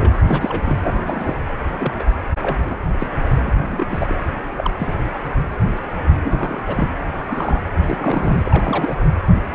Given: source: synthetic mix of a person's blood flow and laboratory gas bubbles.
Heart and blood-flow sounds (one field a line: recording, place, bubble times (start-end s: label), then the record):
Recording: Doppler ultrasound of blood flow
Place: precordium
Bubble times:
0.00-0.15 s: bubbles
0.27-0.77 s: bubbles
0.84-1.39 s: bubbles
1.79-1.93 s: bubbles
1.96-2.05 s: bubbles
2.42-2.77 s: bubbles
2.98-3.07 s: bubbles
3.35-3.41 s: bubbles
3.44-4.16 s: bubbles
4.57-4.71 s: bubbles
4.79-4.94 s: bubbles
6.24-6.89 s: bubbles
7.01-7.24 s: bubbles
7.28-7.62 s: bubbles
7.86-9.01 s: bubbles
From the record:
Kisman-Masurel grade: 232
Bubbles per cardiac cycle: several, 3 to 8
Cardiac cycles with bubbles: 50 to 99%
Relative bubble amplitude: moderate (0.250 to 0.450)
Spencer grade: 3 (all of the cardiac periods contain showers or single bubble signals, but not dominating or overriding the cardiac motion signals)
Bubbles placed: anywhere in the cardiac cycle